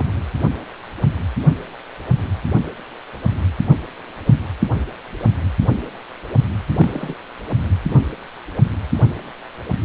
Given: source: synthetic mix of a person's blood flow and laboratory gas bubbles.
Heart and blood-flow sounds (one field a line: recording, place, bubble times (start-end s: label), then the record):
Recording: Doppler ultrasound of blood flow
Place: precordium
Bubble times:
0.00-0.06 s: bubbles
6.78-7.15 s: bubbles
From the record:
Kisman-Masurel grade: 121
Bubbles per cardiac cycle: 1 to 2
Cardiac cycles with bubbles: 10 to 50%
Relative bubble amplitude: barely perceptible (0.100 to 0.250)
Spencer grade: 2 (many but less than half of the cardiac periods contain bubble signals, singularly or in groups)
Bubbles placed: anywhere in the cardiac cycle